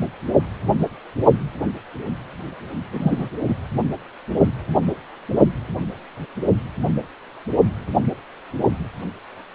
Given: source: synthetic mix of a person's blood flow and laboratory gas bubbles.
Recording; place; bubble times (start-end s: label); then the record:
Doppler ultrasound of blood flow; precordium
2.92-3.28 s: bubbles
3.49-3.54 s: bubbles
From the record:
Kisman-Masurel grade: 113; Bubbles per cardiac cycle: 1 to 2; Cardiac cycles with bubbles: 1 to 10%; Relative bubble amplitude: loud (0.450 to 0.775); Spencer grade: 1 (occasional bubble signal discernible with the cardiac motion signal, with majority of cardiac periods free of bubbles); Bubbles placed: only in the low amplitude regions of the cardiac cycle